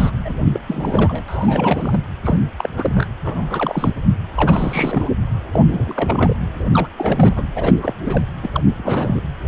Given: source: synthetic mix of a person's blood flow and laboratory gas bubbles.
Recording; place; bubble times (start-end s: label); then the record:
Doppler ultrasound of blood flow; precordium
0.00-0.10 s: bubbles
0.24-0.35 s: bubbles
0.52-0.59 s: bubbles
0.67-1.23 s: bubbles
1.28-2.00 s: bubbles
2.23-2.40 s: bubbles
2.56-2.69 s: bubbles
2.77-3.06 s: bubbles
3.24-3.95 s: bubbles
4.31-5.09 s: bubbles
5.53-6.36 s: bubbles
6.71-6.89 s: bubbles
6.98-7.43 s: bubbles
7.55-7.73 s: bubbles
7.77-7.94 s: bubbles
8.04-8.25 s: bubbles
8.41-8.49 s: bubbles
8.52-8.62 s: bubbles
8.77-9.21 s: bubbles
From the record:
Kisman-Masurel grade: 342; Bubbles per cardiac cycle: rolling drumbeat, 9 or more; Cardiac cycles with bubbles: 100%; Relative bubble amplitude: moderate (0.250 to 0.450); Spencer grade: 3 (all of the cardiac periods contain showers or single bubble signals, but not dominating or overriding the cardiac motion signals); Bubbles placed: anywhere in the cardiac cycle